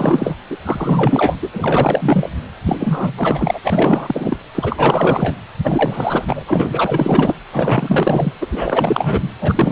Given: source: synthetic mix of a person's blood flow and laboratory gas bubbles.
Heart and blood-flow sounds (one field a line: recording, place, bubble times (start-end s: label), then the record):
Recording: Doppler ultrasound of blood flow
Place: precordium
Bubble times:
0.00-0.35 s: bubbles
0.49-0.57 s: bubbles
0.64-1.39 s: bubbles
1.42-1.49 s: bubbles
1.53-2.28 s: bubbles
2.65-3.59 s: bubbles
3.63-4.38 s: bubbles
4.54-5.34 s: bubbles
5.63-6.44 s: bubbles
6.47-7.34 s: bubbles
7.52-8.32 s: bubbles
8.41-9.29 s: bubbles
9.40-9.72 s: bubbles
From the record:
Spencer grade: 4 (maximum detectable bubble signal sounding continuously throughout systole and diastole of every cardiac period, and overriding the amplitude of the normal cardiac signals)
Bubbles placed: anywhere in the cardiac cycle